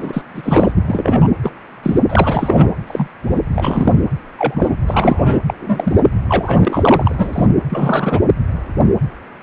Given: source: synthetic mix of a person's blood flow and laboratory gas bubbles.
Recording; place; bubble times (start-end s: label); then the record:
Doppler ultrasound of blood flow; precordium
0.00-0.22 s: bubbles
0.34-0.72 s: bubbles
0.75-0.82 s: bubbles
0.88-1.27 s: bubbles
1.43-1.50 s: bubbles
1.83-1.99 s: bubbles
2.09-2.73 s: bubbles
2.87-3.08 s: bubbles
3.22-3.41 s: bubbles
3.53-3.94 s: bubbles
4.38-4.75 s: bubbles
4.87-5.39 s: bubbles
5.47-5.54 s: bubbles
5.60-6.01 s: bubbles
6.28-7.15 s: bubbles
7.19-7.46 s: bubbles
7.70-8.20 s: bubbles
From the record:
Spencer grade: 3 (all of the cardiac periods contain showers or single bubble signals, but not dominating or overriding the cardiac motion signals); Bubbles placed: anywhere in the cardiac cycle